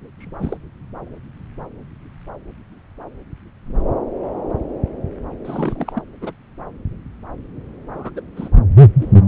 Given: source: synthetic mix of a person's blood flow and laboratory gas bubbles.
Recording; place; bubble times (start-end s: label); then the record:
Doppler ultrasound of blood flow; subclavian vein
0.20-0.57 s: bubbles
5.44-6.02 s: bubbles
6.21-6.31 s: bubbles
7.93-8.11 s: bubbles
8.15-8.21 s: bubbles
8.36-8.49 s: bubbles
9.00-9.19 s: bubbles
From the record:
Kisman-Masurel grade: 221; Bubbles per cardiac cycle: several, 3 to 8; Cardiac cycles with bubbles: 10 to 50%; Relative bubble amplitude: barely perceptible (0.100 to 0.250); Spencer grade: 2 (many but less than half of the cardiac periods contain bubble signals, singularly or in groups); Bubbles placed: anywhere in the cardiac cycle